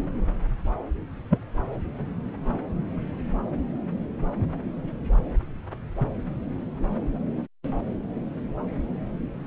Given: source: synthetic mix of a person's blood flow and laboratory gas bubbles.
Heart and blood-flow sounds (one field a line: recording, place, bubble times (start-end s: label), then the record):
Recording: Doppler ultrasound of blood flow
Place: subclavian vein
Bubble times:
1.30-1.39 s: bubbles
From the record:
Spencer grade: 2 (many but less than half of the cardiac periods contain bubble signals, singularly or in groups)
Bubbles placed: anywhere in the cardiac cycle